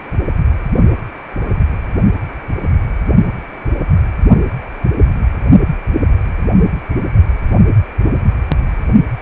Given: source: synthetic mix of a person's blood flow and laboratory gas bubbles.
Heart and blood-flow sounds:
Doppler ultrasound of blood flow; precordium
no bubbles
From the record:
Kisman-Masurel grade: 000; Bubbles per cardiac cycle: 0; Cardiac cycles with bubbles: 0%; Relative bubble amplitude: no bubbles discernible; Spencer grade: 0 (complete lack of bubble signals)

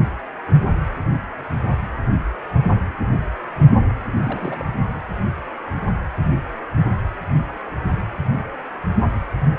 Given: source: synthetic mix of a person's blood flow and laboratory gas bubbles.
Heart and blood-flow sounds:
Doppler ultrasound of blood flow; precordium
4.17-4.65 s: bubbles
4.88-5.01 s: bubbles
From the record:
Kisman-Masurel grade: 221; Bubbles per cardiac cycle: several, 3 to 8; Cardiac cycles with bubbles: 10 to 50%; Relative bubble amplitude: barely perceptible (0.100 to 0.250); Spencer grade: 2 (many but less than half of the cardiac periods contain bubble signals, singularly or in groups); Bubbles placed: anywhere in the cardiac cycle

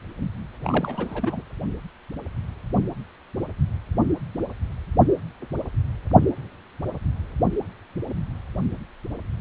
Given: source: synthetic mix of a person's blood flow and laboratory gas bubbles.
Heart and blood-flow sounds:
Doppler ultrasound of blood flow; precordium
0.64-1.43 s: bubbles
From the record:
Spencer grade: 2 (many but less than half of the cardiac periods contain bubble signals, singularly or in groups); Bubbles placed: anywhere in the cardiac cycle

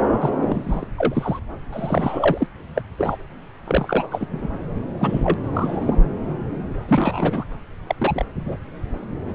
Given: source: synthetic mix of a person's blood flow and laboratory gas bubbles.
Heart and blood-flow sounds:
Doppler ultrasound of blood flow; subclavian vein
0.00-0.04 s: bubbles
0.20-0.32 s: bubbles
0.36-0.88 s: bubbles
0.98-1.40 s: bubbles
1.72-2.47 s: bubbles
2.75-2.81 s: bubbles
2.98-3.17 s: bubbles
3.67-4.27 s: bubbles
4.31-4.48 s: bubbles
4.99-5.34 s: bubbles
5.43-5.96 s: bubbles
6.88-7.45 s: bubbles
7.87-7.95 s: bubbles
8.01-8.26 s: bubbles
8.46-8.57 s: bubbles
From the record:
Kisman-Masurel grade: 232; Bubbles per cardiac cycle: several, 3 to 8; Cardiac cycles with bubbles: 50 to 99%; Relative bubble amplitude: moderate (0.250 to 0.450); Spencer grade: 3 (all of the cardiac periods contain showers or single bubble signals, but not dominating or overriding the cardiac motion signals); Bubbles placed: anywhere in the cardiac cycle

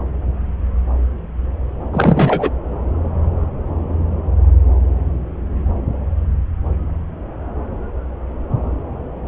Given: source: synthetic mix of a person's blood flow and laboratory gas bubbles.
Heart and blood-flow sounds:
Doppler ultrasound of blood flow; subclavian vein
1.92-2.50 s: bubbles
From the record:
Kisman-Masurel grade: 213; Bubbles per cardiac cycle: several, 3 to 8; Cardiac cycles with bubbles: 1 to 10%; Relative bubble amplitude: loud (0.450 to 0.775); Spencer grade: 1 (occasional bubble signal discernible with the cardiac motion signal, with majority of cardiac periods free of bubbles); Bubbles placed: anywhere in the cardiac cycle

